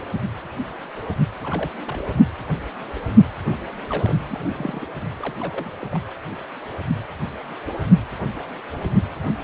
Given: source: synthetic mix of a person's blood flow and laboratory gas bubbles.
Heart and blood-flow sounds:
Doppler ultrasound of blood flow; precordium
1.41-1.70 s: bubbles
1.87-2.02 s: bubbles
3.90-4.15 s: bubbles
4.28-4.88 s: bubbles
5.17-5.37 s: bubbles
5.40-5.71 s: bubbles
5.79-5.88 s: bubbles
5.91-5.98 s: bubbles
From the record:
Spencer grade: 2 (many but less than half of the cardiac periods contain bubble signals, singularly or in groups); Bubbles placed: anywhere in the cardiac cycle

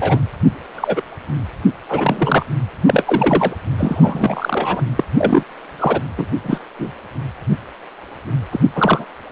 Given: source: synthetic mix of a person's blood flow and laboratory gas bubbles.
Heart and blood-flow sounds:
Doppler ultrasound of blood flow; precordium
0.00-0.20 s: bubbles
0.75-1.03 s: bubbles
1.88-2.46 s: bubbles
2.87-3.55 s: bubbles
3.78-4.82 s: bubbles
4.96-5.04 s: bubbles
5.18-5.43 s: bubbles
5.79-6.00 s: bubbles
6.17-6.25 s: bubbles
6.43-6.59 s: bubbles
6.79-6.92 s: bubbles
8.52-8.60 s: bubbles
8.75-9.05 s: bubbles
From the record:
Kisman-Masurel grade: 233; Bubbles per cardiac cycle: several, 3 to 8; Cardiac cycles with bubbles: 50 to 99%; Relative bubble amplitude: loud (0.450 to 0.775); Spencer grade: 3 (all of the cardiac periods contain showers or single bubble signals, but not dominating or overriding the cardiac motion signals); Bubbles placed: anywhere in the cardiac cycle

